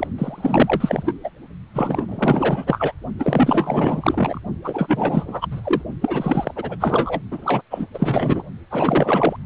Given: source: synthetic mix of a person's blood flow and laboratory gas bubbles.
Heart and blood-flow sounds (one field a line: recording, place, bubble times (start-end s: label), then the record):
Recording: Doppler ultrasound of blood flow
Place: precordium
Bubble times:
0.00-0.07 s: bubbles
0.18-1.13 s: bubbles
1.24-1.31 s: bubbles
1.73-2.05 s: bubbles
2.08-2.94 s: bubbles
3.19-4.40 s: bubbles
4.64-5.47 s: bubbles
5.50-5.61 s: bubbles
5.63-5.82 s: bubbles
6.01-6.76 s: bubbles
6.80-7.20 s: bubbles
7.31-7.62 s: bubbles
7.70-7.86 s: bubbles
7.93-8.43 s: bubbles
8.70-9.37 s: bubbles
From the record:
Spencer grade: 4 (maximum detectable bubble signal sounding continuously throughout systole and diastole of every cardiac period, and overriding the amplitude of the normal cardiac signals)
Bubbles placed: only in the low amplitude regions of the cardiac cycle